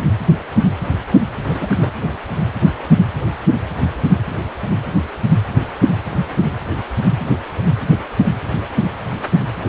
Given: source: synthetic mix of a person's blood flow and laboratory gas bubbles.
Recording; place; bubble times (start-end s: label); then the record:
Doppler ultrasound of blood flow; precordium
1.48-1.91 s: bubbles
From the record:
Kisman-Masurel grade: 211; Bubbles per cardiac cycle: several, 3 to 8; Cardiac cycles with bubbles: 1 to 10%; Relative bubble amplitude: barely perceptible (0.100 to 0.250); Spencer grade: 1 (occasional bubble signal discernible with the cardiac motion signal, with majority of cardiac periods free of bubbles); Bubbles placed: anywhere in the cardiac cycle